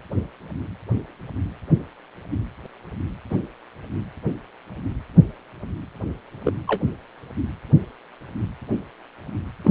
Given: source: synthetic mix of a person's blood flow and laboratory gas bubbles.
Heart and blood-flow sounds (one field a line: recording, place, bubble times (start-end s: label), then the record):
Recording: Doppler ultrasound of blood flow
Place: precordium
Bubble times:
3.30-3.37 s: bubbles
6.44-6.53 s: bubbles
6.67-6.82 s: bubbles
9.64-9.71 s: bubbles
From the record:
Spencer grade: 2 (many but less than half of the cardiac periods contain bubble signals, singularly or in groups)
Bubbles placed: anywhere in the cardiac cycle